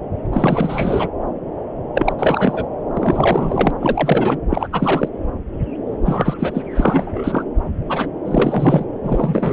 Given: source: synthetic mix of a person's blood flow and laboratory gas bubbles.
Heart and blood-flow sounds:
Doppler ultrasound of blood flow; subclavian vein
0.32-1.08 s: bubbles
1.94-2.13 s: bubbles
2.17-2.65 s: bubbles
2.94-3.71 s: bubbles
3.79-4.38 s: bubbles
4.50-4.68 s: bubbles
4.72-5.08 s: bubbles
6.05-6.34 s: bubbles
6.39-6.51 s: bubbles
6.54-6.62 s: bubbles
6.75-7.43 s: bubbles
7.88-8.07 s: bubbles
8.26-8.85 s: bubbles
9.03-9.53 s: bubbles
From the record:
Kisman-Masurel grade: 333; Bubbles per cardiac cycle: rolling drumbeat, 9 or more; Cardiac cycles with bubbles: 50 to 99%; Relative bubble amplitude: loud (0.450 to 0.775); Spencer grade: 3 (all of the cardiac periods contain showers or single bubble signals, but not dominating or overriding the cardiac motion signals); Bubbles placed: anywhere in the cardiac cycle

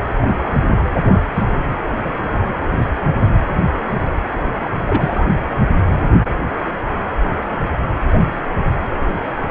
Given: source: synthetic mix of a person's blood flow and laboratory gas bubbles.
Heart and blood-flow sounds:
Doppler ultrasound of blood flow; precordium
0.14-0.35 s: bubbles
1.00-1.17 s: bubbles
1.34-1.43 s: bubbles
2.04-2.12 s: bubbles
3.20-3.31 s: bubbles
4.86-5.25 s: bubbles
From the record:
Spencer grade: 2 (many but less than half of the cardiac periods contain bubble signals, singularly or in groups); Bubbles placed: anywhere in the cardiac cycle

